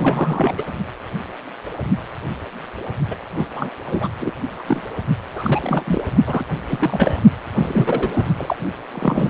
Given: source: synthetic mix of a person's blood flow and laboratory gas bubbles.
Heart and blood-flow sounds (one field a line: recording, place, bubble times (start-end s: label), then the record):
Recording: Doppler ultrasound of blood flow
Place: precordium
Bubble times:
0.00-0.64 s: bubbles
3.10-3.16 s: bubbles
3.35-3.48 s: bubbles
3.54-3.70 s: bubbles
3.86-4.08 s: bubbles
4.19-4.32 s: bubbles
4.58-4.62 s: bubbles
4.67-4.83 s: bubbles
5.33-6.03 s: bubbles
6.26-6.45 s: bubbles
6.67-7.20 s: bubbles
7.52-8.34 s: bubbles
8.37-8.56 s: bubbles
8.94-9.29 s: bubbles
From the record:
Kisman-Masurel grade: 332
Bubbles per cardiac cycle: rolling drumbeat, 9 or more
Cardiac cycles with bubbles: 50 to 99%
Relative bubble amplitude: moderate (0.250 to 0.450)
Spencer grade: 3 (all of the cardiac periods contain showers or single bubble signals, but not dominating or overriding the cardiac motion signals)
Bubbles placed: only in the low amplitude regions of the cardiac cycle